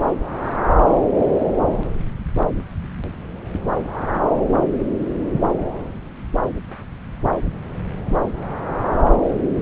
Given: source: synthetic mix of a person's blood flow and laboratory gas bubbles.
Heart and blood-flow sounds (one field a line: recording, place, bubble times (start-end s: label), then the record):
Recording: Doppler ultrasound of blood flow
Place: subclavian vein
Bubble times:
no bubbles
From the record:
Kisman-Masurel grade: 000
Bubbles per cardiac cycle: 0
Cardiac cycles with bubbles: 0%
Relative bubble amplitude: no bubbles discernible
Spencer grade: 0 (complete lack of bubble signals)